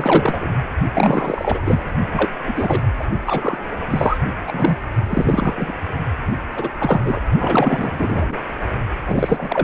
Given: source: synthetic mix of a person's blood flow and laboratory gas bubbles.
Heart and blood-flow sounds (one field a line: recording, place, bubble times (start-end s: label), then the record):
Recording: Doppler ultrasound of blood flow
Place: precordium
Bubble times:
0.00-0.49 s: bubbles
0.94-1.61 s: bubbles
1.64-1.80 s: bubbles
2.13-2.31 s: bubbles
2.46-2.81 s: bubbles
2.98-3.03 s: bubbles
3.26-3.58 s: bubbles
3.90-4.18 s: bubbles
4.47-4.76 s: bubbles
5.08-5.54 s: bubbles
5.57-5.72 s: bubbles
6.56-6.69 s: bubbles
6.78-7.20 s: bubbles
7.39-8.38 s: bubbles
9.04-9.64 s: bubbles
From the record:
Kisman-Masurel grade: 343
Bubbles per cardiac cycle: rolling drumbeat, 9 or more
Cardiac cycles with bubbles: 100%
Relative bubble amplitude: loud (0.450 to 0.775)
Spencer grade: 3 (all of the cardiac periods contain showers or single bubble signals, but not dominating or overriding the cardiac motion signals)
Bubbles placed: only in the low amplitude regions of the cardiac cycle